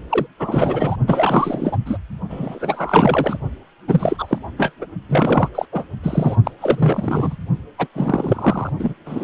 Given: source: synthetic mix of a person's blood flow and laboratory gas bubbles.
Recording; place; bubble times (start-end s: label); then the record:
Doppler ultrasound of blood flow; precordium
0.09-0.26 s: bubbles
0.39-0.96 s: bubbles
1.06-1.77 s: bubbles
1.85-1.97 s: bubbles
2.29-3.37 s: bubbles
3.88-4.38 s: bubbles
4.58-4.72 s: bubbles
4.81-4.85 s: bubbles
5.08-5.49 s: bubbles
5.54-5.66 s: bubbles
5.72-5.89 s: bubbles
6.03-6.37 s: bubbles
6.45-6.51 s: bubbles
6.59-7.36 s: bubbles
7.78-7.87 s: bubbles
7.95-8.71 s: bubbles
8.79-8.94 s: bubbles
9.05-9.24 s: bubbles
From the record:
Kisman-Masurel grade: 343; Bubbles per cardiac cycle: rolling drumbeat, 9 or more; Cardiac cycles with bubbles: 100%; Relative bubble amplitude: loud (0.450 to 0.775); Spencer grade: 3 (all of the cardiac periods contain showers or single bubble signals, but not dominating or overriding the cardiac motion signals); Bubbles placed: only in the low amplitude regions of the cardiac cycle